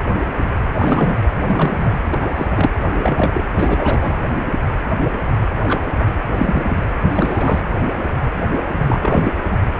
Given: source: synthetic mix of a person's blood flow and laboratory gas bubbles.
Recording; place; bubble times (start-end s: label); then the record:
Doppler ultrasound of blood flow; precordium
0.79-1.17 s: bubbles
1.40-1.92 s: bubbles
2.11-2.29 s: bubbles
2.36-2.71 s: bubbles
2.81-3.44 s: bubbles
3.57-4.12 s: bubbles
5.63-5.83 s: bubbles
5.99-6.12 s: bubbles
6.34-6.85 s: bubbles
7.09-7.61 s: bubbles
8.72-9.32 s: bubbles
From the record:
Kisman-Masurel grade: 232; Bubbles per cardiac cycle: several, 3 to 8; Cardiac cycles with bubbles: 50 to 99%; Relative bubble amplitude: moderate (0.250 to 0.450); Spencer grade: 3 (all of the cardiac periods contain showers or single bubble signals, but not dominating or overriding the cardiac motion signals); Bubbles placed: anywhere in the cardiac cycle